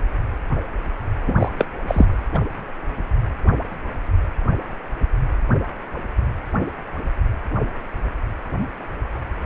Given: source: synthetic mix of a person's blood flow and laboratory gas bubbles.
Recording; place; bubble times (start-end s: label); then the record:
Doppler ultrasound of blood flow; precordium
1.28-1.49 s: bubbles
1.58-1.66 s: bubbles
1.88-2.06 s: bubbles
2.33-2.40 s: bubbles
From the record:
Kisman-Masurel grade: 213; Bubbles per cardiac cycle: several, 3 to 8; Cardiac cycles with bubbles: 1 to 10%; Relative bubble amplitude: loud (0.450 to 0.775); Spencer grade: 1 (occasional bubble signal discernible with the cardiac motion signal, with majority of cardiac periods free of bubbles); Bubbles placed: anywhere in the cardiac cycle